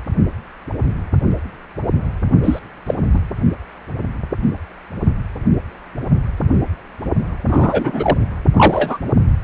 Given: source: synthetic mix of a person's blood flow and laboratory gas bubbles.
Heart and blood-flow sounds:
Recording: Doppler ultrasound of blood flow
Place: precordium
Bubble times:
2.44-2.59 s: bubbles
2.86-2.94 s: bubbles
3.13-3.19 s: bubbles
7.48-8.18 s: bubbles
8.56-8.98 s: bubbles
From the record:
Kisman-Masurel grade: 223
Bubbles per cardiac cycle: several, 3 to 8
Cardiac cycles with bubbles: 10 to 50%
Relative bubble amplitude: loud (0.450 to 0.775)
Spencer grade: 2 (many but less than half of the cardiac periods contain bubble signals, singularly or in groups)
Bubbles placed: only in the low amplitude regions of the cardiac cycle

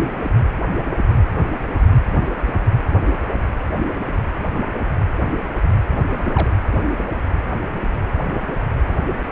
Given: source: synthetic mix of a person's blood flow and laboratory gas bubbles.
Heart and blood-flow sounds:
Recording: Doppler ultrasound of blood flow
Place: precordium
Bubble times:
6.23-6.54 s: bubbles
From the record:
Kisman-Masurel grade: 111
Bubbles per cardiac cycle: 1 to 2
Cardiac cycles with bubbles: 1 to 10%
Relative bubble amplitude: barely perceptible (0.100 to 0.250)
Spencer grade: 1 (occasional bubble signal discernible with the cardiac motion signal, with majority of cardiac periods free of bubbles)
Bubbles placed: anywhere in the cardiac cycle

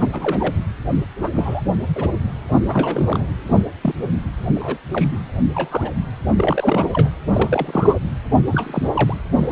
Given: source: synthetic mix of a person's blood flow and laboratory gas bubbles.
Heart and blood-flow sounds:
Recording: Doppler ultrasound of blood flow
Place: precordium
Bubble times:
0.00-0.09 s: bubbles
0.12-0.55 s: bubbles
1.19-1.29 s: bubbles
1.32-1.61 s: bubbles
1.95-2.08 s: bubbles
2.48-2.56 s: bubbles
2.67-3.25 s: bubbles
3.47-3.66 s: bubbles
3.81-3.93 s: bubbles
4.55-4.77 s: bubbles
4.92-5.08 s: bubbles
5.12-5.18 s: bubbles
5.54-5.91 s: bubbles
6.35-6.89 s: bubbles
6.93-7.10 s: bubbles
7.33-7.96 s: bubbles
8.52-8.88 s: bubbles
8.94-9.14 s: bubbles
9.35-9.51 s: bubbles
From the record:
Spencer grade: 3 (all of the cardiac periods contain showers or single bubble signals, but not dominating or overriding the cardiac motion signals)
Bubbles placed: anywhere in the cardiac cycle

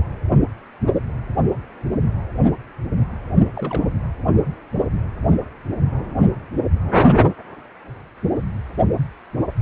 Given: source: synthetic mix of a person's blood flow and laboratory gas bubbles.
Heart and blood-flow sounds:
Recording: Doppler ultrasound of blood flow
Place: precordium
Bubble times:
3.56-3.90 s: bubbles
From the record:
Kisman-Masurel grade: 211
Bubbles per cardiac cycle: several, 3 to 8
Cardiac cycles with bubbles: 1 to 10%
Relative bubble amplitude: barely perceptible (0.100 to 0.250)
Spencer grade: 1 (occasional bubble signal discernible with the cardiac motion signal, with majority of cardiac periods free of bubbles)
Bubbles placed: anywhere in the cardiac cycle

